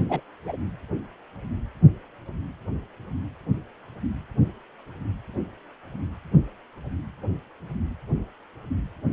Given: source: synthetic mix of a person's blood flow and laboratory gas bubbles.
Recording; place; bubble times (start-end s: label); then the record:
Doppler ultrasound of blood flow; precordium
0.09-0.21 s: bubbles
0.45-0.56 s: bubbles
From the record:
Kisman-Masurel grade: 112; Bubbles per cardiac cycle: 1 to 2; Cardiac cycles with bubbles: 1 to 10%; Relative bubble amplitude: moderate (0.250 to 0.450); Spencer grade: 1 (occasional bubble signal discernible with the cardiac motion signal, with majority of cardiac periods free of bubbles); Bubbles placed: anywhere in the cardiac cycle